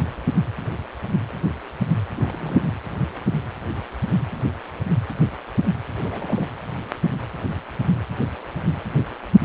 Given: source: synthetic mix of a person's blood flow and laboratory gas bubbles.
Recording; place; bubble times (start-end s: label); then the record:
Doppler ultrasound of blood flow; precordium
2.17-2.63 s: bubbles
2.66-2.77 s: bubbles
5.98-6.57 s: bubbles
From the record:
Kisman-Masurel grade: 211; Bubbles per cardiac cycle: several, 3 to 8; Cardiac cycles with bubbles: 1 to 10%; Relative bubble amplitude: barely perceptible (0.100 to 0.250); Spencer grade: 1 (occasional bubble signal discernible with the cardiac motion signal, with majority of cardiac periods free of bubbles); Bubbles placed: anywhere in the cardiac cycle